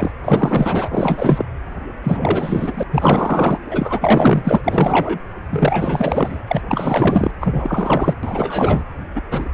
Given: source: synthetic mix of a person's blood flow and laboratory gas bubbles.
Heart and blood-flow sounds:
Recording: Doppler ultrasound of blood flow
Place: precordium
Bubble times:
0.00-0.12 s: bubbles
0.23-1.45 s: bubbles
2.03-2.83 s: bubbles
2.90-3.58 s: bubbles
3.71-4.62 s: bubbles
4.64-5.19 s: bubbles
5.50-6.44 s: bubbles
6.47-6.62 s: bubbles
6.68-7.31 s: bubbles
7.41-8.15 s: bubbles
8.23-8.84 s: bubbles
9.15-9.22 s: bubbles
9.30-9.49 s: bubbles
From the record:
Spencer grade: 4 (maximum detectable bubble signal sounding continuously throughout systole and diastole of every cardiac period, and overriding the amplitude of the normal cardiac signals)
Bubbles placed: anywhere in the cardiac cycle

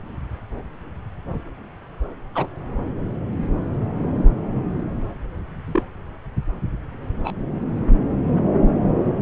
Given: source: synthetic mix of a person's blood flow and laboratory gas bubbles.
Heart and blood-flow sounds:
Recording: Doppler ultrasound of blood flow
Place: subclavian vein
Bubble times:
2.35-2.47 s: bubbles
5.66-5.83 s: bubbles
7.23-7.35 s: bubbles
From the record:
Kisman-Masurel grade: 122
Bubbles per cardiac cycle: 1 to 2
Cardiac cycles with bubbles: 10 to 50%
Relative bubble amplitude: moderate (0.250 to 0.450)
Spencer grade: 2 (many but less than half of the cardiac periods contain bubble signals, singularly or in groups)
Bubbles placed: anywhere in the cardiac cycle

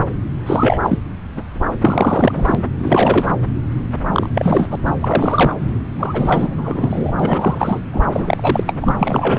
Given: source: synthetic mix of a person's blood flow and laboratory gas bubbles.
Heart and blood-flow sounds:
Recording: Doppler ultrasound of blood flow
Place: subclavian vein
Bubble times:
0.46-0.78 s: bubbles
0.83-0.99 s: bubbles
1.35-1.44 s: bubbles
1.80-2.62 s: bubbles
2.79-3.33 s: bubbles
4.13-4.29 s: bubbles
4.34-4.75 s: bubbles
4.85-4.91 s: bubbles
5.00-5.55 s: bubbles
5.99-7.12 s: bubbles
7.19-7.82 s: bubbles
7.93-8.05 s: bubbles
8.12-8.64 s: bubbles
8.66-8.74 s: bubbles
8.81-8.94 s: bubbles
8.98-9.39 s: bubbles
From the record:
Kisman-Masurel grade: 343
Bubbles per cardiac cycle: rolling drumbeat, 9 or more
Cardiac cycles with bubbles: 100%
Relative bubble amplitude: loud (0.450 to 0.775)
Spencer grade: 3 (all of the cardiac periods contain showers or single bubble signals, but not dominating or overriding the cardiac motion signals)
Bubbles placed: anywhere in the cardiac cycle

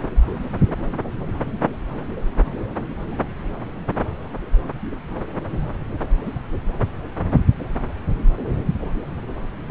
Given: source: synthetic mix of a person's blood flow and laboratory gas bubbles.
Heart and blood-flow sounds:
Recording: Doppler ultrasound of blood flow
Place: subclavian vein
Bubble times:
9.68-9.71 s: bubbles
From the record:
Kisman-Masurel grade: 213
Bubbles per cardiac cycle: several, 3 to 8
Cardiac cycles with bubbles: 1 to 10%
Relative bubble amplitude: loud (0.450 to 0.775)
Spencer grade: 1 (occasional bubble signal discernible with the cardiac motion signal, with majority of cardiac periods free of bubbles)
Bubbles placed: anywhere in the cardiac cycle

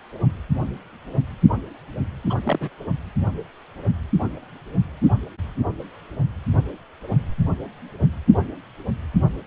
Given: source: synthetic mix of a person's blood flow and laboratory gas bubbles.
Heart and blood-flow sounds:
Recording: Doppler ultrasound of blood flow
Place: precordium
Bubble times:
2.29-2.35 s: bubbles
2.44-2.69 s: bubbles
From the record:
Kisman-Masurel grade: 212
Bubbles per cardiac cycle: several, 3 to 8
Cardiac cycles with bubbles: 1 to 10%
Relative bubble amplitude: moderate (0.250 to 0.450)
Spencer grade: 1 (occasional bubble signal discernible with the cardiac motion signal, with majority of cardiac periods free of bubbles)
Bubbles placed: anywhere in the cardiac cycle

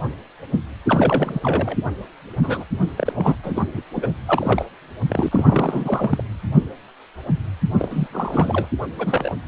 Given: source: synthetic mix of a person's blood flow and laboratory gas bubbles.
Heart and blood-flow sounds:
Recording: Doppler ultrasound of blood flow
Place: precordium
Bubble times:
0.85-1.40 s: bubbles
1.43-1.77 s: bubbles
2.42-2.64 s: bubbles
2.96-3.13 s: bubbles
3.15-3.35 s: bubbles
3.43-3.67 s: bubbles
3.74-3.83 s: bubbles
3.96-4.12 s: bubbles
4.25-4.65 s: bubbles
5.08-5.29 s: bubbles
5.31-6.23 s: bubbles
7.79-8.08 s: bubbles
8.12-8.69 s: bubbles
8.99-9.33 s: bubbles
From the record:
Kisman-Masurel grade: 332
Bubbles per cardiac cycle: rolling drumbeat, 9 or more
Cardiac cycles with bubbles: 50 to 99%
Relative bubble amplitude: moderate (0.250 to 0.450)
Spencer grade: 3 (all of the cardiac periods contain showers or single bubble signals, but not dominating or overriding the cardiac motion signals)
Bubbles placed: anywhere in the cardiac cycle

